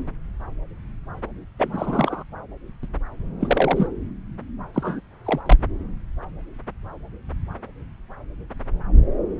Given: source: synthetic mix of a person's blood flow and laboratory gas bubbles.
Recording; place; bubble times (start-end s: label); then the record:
Doppler ultrasound of blood flow; subclavian vein
1.58-2.23 s: bubbles
2.83-2.87 s: bubbles
3.40-3.87 s: bubbles
4.74-5.01 s: bubbles
5.25-5.40 s: bubbles
5.46-5.57 s: bubbles
From the record:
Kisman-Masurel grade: 222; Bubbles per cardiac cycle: several, 3 to 8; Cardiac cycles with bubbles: 10 to 50%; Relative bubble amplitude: moderate (0.250 to 0.450); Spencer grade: 2 (many but less than half of the cardiac periods contain bubble signals, singularly or in groups); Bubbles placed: anywhere in the cardiac cycle